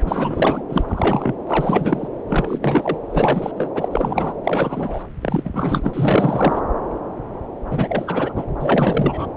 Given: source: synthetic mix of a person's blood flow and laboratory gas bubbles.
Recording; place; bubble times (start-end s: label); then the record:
Doppler ultrasound of blood flow; subclavian vein
0.05-0.62 s: bubbles
0.69-0.84 s: bubbles
0.88-1.35 s: bubbles
1.47-2.08 s: bubbles
2.29-2.98 s: bubbles
3.09-3.52 s: bubbles
3.55-3.71 s: bubbles
3.75-4.33 s: bubbles
4.43-5.04 s: bubbles
5.21-5.50 s: bubbles
5.53-6.61 s: bubbles
7.71-8.45 s: bubbles
8.59-9.26 s: bubbles
From the record:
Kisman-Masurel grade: 333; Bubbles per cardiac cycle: rolling drumbeat, 9 or more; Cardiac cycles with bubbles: 50 to 99%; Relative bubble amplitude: loud (0.450 to 0.775); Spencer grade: 3 (all of the cardiac periods contain showers or single bubble signals, but not dominating or overriding the cardiac motion signals); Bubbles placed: anywhere in the cardiac cycle